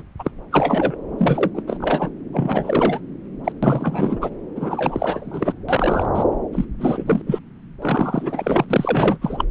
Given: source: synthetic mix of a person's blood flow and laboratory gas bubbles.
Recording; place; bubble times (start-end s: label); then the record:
Doppler ultrasound of blood flow; subclavian vein
0.00-0.03 s: bubbles
0.19-0.31 s: bubbles
0.51-0.96 s: bubbles
1.19-1.51 s: bubbles
1.54-1.62 s: bubbles
1.67-2.10 s: bubbles
2.32-3.00 s: bubbles
3.44-3.52 s: bubbles
3.62-4.30 s: bubbles
4.55-5.53 s: bubbles
5.69-6.09 s: bubbles
6.14-6.24 s: bubbles
6.52-6.65 s: bubbles
6.79-7.22 s: bubbles
7.27-7.39 s: bubbles
7.81-9.18 s: bubbles
9.21-9.45 s: bubbles
From the record:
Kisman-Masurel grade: 343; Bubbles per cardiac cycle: rolling drumbeat, 9 or more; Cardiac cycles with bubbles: 100%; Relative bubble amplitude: loud (0.450 to 0.775); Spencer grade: 3 (all of the cardiac periods contain showers or single bubble signals, but not dominating or overriding the cardiac motion signals); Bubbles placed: anywhere in the cardiac cycle